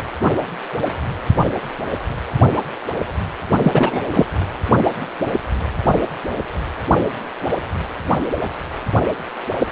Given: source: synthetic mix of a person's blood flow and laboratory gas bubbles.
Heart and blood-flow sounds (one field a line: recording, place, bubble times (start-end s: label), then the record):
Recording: Doppler ultrasound of blood flow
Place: precordium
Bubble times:
3.62-4.01 s: bubbles
4.10-4.25 s: bubbles
From the record:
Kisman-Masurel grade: 213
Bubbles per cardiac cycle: several, 3 to 8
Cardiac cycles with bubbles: 1 to 10%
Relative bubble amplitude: loud (0.450 to 0.775)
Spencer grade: 1 (occasional bubble signal discernible with the cardiac motion signal, with majority of cardiac periods free of bubbles)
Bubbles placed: anywhere in the cardiac cycle